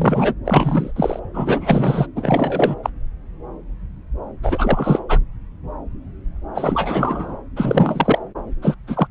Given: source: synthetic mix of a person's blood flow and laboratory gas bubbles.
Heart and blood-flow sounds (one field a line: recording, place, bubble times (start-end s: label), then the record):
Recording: Doppler ultrasound of blood flow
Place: subclavian vein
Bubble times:
0.00-0.34 s: bubbles
0.45-0.92 s: bubbles
0.96-1.20 s: bubbles
1.33-2.07 s: bubbles
2.15-2.75 s: bubbles
2.83-2.90 s: bubbles
4.43-5.04 s: bubbles
5.08-5.19 s: bubbles
6.54-7.38 s: bubbles
7.56-8.18 s: bubbles
8.62-8.75 s: bubbles
8.87-9.07 s: bubbles
From the record:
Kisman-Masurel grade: 333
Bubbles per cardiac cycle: rolling drumbeat, 9 or more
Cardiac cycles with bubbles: 50 to 99%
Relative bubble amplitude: loud (0.450 to 0.775)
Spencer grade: 3 (all of the cardiac periods contain showers or single bubble signals, but not dominating or overriding the cardiac motion signals)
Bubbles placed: anywhere in the cardiac cycle